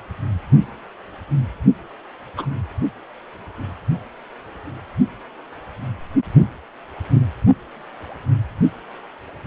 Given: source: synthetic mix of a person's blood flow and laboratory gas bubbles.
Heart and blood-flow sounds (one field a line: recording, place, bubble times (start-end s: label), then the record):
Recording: Doppler ultrasound of blood flow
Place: precordium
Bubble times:
2.37-2.46 s: bubbles
From the record:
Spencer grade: 2 (many but less than half of the cardiac periods contain bubble signals, singularly or in groups)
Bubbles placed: only in the low amplitude regions of the cardiac cycle